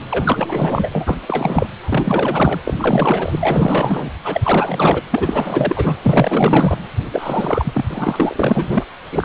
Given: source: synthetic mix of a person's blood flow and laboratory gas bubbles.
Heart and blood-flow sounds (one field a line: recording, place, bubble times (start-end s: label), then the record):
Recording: Doppler ultrasound of blood flow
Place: precordium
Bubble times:
0.11-0.90 s: bubbles
0.92-1.20 s: bubbles
1.27-1.67 s: bubbles
1.81-2.60 s: bubbles
2.65-2.74 s: bubbles
2.79-4.11 s: bubbles
4.24-5.02 s: bubbles
5.11-5.98 s: bubbles
6.03-6.78 s: bubbles
7.12-8.86 s: bubbles
9.11-9.25 s: bubbles
From the record:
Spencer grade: 4 (maximum detectable bubble signal sounding continuously throughout systole and diastole of every cardiac period, and overriding the amplitude of the normal cardiac signals)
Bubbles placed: anywhere in the cardiac cycle